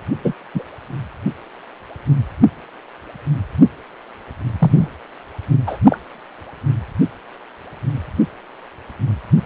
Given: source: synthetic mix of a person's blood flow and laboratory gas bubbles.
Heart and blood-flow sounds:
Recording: Doppler ultrasound of blood flow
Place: precordium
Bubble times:
0.24-0.34 s: bubbles
0.54-0.62 s: bubbles
4.58-4.89 s: bubbles
5.67-5.78 s: bubbles
5.85-5.99 s: bubbles
From the record:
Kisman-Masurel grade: 123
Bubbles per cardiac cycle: 1 to 2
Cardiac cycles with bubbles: 10 to 50%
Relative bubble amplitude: loud (0.450 to 0.775)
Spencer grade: 2 (many but less than half of the cardiac periods contain bubble signals, singularly or in groups)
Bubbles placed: anywhere in the cardiac cycle

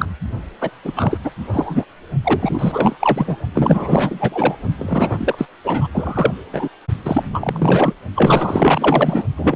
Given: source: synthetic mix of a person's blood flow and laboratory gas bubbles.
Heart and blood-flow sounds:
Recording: Doppler ultrasound of blood flow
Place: precordium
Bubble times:
0.00-0.14 s: bubbles
0.60-0.71 s: bubbles
0.84-0.92 s: bubbles
0.96-1.19 s: bubbles
1.24-1.31 s: bubbles
1.53-1.84 s: bubbles
2.24-3.36 s: bubbles
3.55-4.58 s: bubbles
4.79-5.48 s: bubbles
5.64-5.88 s: bubbles
5.93-6.34 s: bubbles
6.53-6.69 s: bubbles
7.05-7.94 s: bubbles
8.16-9.23 s: bubbles
9.36-9.56 s: bubbles
From the record:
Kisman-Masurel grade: 444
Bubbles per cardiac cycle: continuous sound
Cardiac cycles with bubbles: 100%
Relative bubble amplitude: maximal (0.775 to 0.999)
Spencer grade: 4 (maximum detectable bubble signal sounding continuously throughout systole and diastole of every cardiac period, and overriding the amplitude of the normal cardiac signals)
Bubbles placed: only in the low amplitude regions of the cardiac cycle

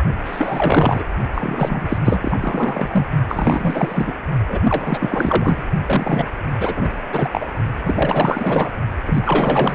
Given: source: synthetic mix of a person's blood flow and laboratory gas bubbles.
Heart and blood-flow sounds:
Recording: Doppler ultrasound of blood flow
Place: precordium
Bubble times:
0.24-1.04 s: bubbles
1.34-1.98 s: bubbles
2.04-2.38 s: bubbles
2.40-3.06 s: bubbles
3.28-4.13 s: bubbles
4.48-4.59 s: bubbles
4.62-5.63 s: bubbles
5.86-6.26 s: bubbles
6.58-6.89 s: bubbles
7.12-7.29 s: bubbles
7.32-7.50 s: bubbles
7.84-8.70 s: bubbles
9.06-9.75 s: bubbles
From the record:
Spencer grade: 4 (maximum detectable bubble signal sounding continuously throughout systole and diastole of every cardiac period, and overriding the amplitude of the normal cardiac signals)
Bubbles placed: only in the low amplitude regions of the cardiac cycle

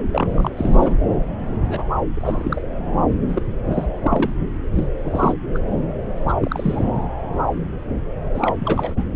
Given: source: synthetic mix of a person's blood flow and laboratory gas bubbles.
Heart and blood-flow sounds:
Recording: Doppler ultrasound of blood flow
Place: subclavian vein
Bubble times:
0.12-0.51 s: bubbles
0.57-0.96 s: bubbles
1.67-1.84 s: bubbles
2.13-2.62 s: bubbles
3.27-3.40 s: bubbles
3.65-3.86 s: bubbles
4.03-4.32 s: bubbles
4.75-4.83 s: bubbles
5.03-5.35 s: bubbles
5.54-5.58 s: bubbles
6.18-6.33 s: bubbles
6.42-6.96 s: bubbles
8.34-8.55 s: bubbles
8.59-9.03 s: bubbles
From the record:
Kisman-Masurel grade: 232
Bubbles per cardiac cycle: several, 3 to 8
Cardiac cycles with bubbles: 50 to 99%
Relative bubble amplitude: moderate (0.250 to 0.450)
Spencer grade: 3 (all of the cardiac periods contain showers or single bubble signals, but not dominating or overriding the cardiac motion signals)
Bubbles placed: anywhere in the cardiac cycle

